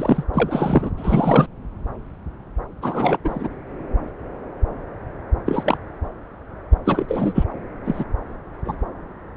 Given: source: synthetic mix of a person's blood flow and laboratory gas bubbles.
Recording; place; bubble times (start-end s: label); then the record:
Doppler ultrasound of blood flow; subclavian vein
0.00-0.24 s: bubbles
0.34-0.91 s: bubbles
0.97-1.47 s: bubbles
2.81-3.19 s: bubbles
3.24-3.48 s: bubbles
5.46-5.78 s: bubbles
6.85-7.44 s: bubbles
7.85-8.04 s: bubbles
8.65-8.76 s: bubbles
From the record:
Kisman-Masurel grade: 233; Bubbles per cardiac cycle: several, 3 to 8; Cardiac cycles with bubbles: 50 to 99%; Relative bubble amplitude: loud (0.450 to 0.775); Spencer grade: 3 (all of the cardiac periods contain showers or single bubble signals, but not dominating or overriding the cardiac motion signals); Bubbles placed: anywhere in the cardiac cycle